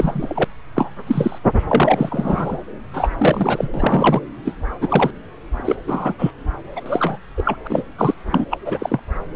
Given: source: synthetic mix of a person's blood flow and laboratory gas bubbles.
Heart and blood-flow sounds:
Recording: Doppler ultrasound of blood flow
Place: subclavian vein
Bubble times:
0.00-0.44 s: bubbles
0.76-0.93 s: bubbles
1.07-1.39 s: bubbles
1.69-2.61 s: bubbles
2.93-3.08 s: bubbles
3.18-3.69 s: bubbles
3.73-4.21 s: bubbles
4.44-4.55 s: bubbles
4.81-5.11 s: bubbles
5.57-5.79 s: bubbles
5.86-6.13 s: bubbles
6.18-6.31 s: bubbles
6.75-6.81 s: bubbles
6.85-7.18 s: bubbles
7.36-7.56 s: bubbles
7.65-7.83 s: bubbles
7.98-8.14 s: bubbles
8.30-8.45 s: bubbles
8.50-8.57 s: bubbles
8.65-8.99 s: bubbles
From the record:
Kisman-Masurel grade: 243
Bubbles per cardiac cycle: several, 3 to 8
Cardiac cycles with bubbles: 100%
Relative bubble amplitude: loud (0.450 to 0.775)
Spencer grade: 3 (all of the cardiac periods contain showers or single bubble signals, but not dominating or overriding the cardiac motion signals)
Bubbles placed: anywhere in the cardiac cycle

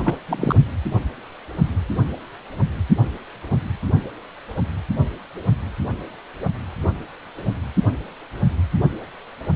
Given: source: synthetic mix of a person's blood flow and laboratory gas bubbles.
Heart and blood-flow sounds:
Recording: Doppler ultrasound of blood flow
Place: precordium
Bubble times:
0.04-0.17 s: bubbles
0.28-0.56 s: bubbles
From the record:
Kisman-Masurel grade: 222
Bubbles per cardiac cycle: several, 3 to 8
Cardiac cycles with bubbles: 10 to 50%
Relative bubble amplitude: moderate (0.250 to 0.450)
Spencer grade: 2 (many but less than half of the cardiac periods contain bubble signals, singularly or in groups)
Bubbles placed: only in the low amplitude regions of the cardiac cycle

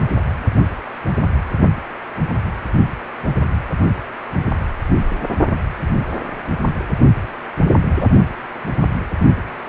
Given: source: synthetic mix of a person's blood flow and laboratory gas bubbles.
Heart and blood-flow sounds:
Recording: Doppler ultrasound of blood flow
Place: precordium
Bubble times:
7.97-8.09 s: bubbles
From the record:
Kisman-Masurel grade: 113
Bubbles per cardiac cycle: 1 to 2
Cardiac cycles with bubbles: 1 to 10%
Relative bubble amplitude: loud (0.450 to 0.775)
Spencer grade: 1 (occasional bubble signal discernible with the cardiac motion signal, with majority of cardiac periods free of bubbles)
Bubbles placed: only in the low amplitude regions of the cardiac cycle

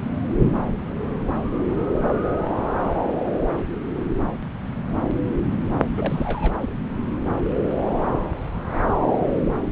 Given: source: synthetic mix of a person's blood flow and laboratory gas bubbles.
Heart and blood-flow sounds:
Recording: Doppler ultrasound of blood flow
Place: subclavian vein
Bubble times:
5.97-6.74 s: bubbles
From the record:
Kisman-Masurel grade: 211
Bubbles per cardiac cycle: several, 3 to 8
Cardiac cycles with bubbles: 1 to 10%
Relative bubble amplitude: barely perceptible (0.100 to 0.250)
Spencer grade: 1 (occasional bubble signal discernible with the cardiac motion signal, with majority of cardiac periods free of bubbles)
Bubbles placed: anywhere in the cardiac cycle

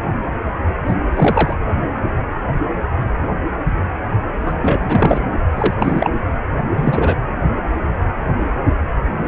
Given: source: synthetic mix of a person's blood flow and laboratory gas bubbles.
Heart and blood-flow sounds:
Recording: Doppler ultrasound of blood flow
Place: precordium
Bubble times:
0.88-0.95 s: bubbles
1.15-1.54 s: bubbles
4.44-4.53 s: bubbles
4.62-5.23 s: bubbles
5.57-5.74 s: bubbles
5.80-6.11 s: bubbles
6.76-7.15 s: bubbles
From the record:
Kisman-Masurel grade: 223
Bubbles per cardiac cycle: several, 3 to 8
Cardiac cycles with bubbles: 10 to 50%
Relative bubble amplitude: loud (0.450 to 0.775)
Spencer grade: 2 (many but less than half of the cardiac periods contain bubble signals, singularly or in groups)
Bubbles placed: anywhere in the cardiac cycle

